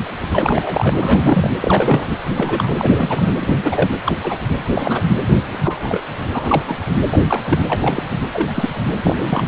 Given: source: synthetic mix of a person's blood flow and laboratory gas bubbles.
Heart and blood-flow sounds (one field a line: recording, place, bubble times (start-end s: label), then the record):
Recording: Doppler ultrasound of blood flow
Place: precordium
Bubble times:
0.29-1.50 s: bubbles
1.60-2.09 s: bubbles
2.28-2.74 s: bubbles
2.77-3.33 s: bubbles
3.40-3.56 s: bubbles
3.62-3.90 s: bubbles
4.04-4.16 s: bubbles
4.23-4.38 s: bubbles
4.72-5.03 s: bubbles
5.33-5.46 s: bubbles
5.51-5.60 s: bubbles
5.63-6.00 s: bubbles
6.31-6.76 s: bubbles
7.12-7.25 s: bubbles
7.29-7.44 s: bubbles
7.46-7.58 s: bubbles
7.67-8.04 s: bubbles
8.09-8.18 s: bubbles
8.33-8.49 s: bubbles
8.54-8.73 s: bubbles
9.03-9.46 s: bubbles
From the record:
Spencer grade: 3 (all of the cardiac periods contain showers or single bubble signals, but not dominating or overriding the cardiac motion signals)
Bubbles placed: anywhere in the cardiac cycle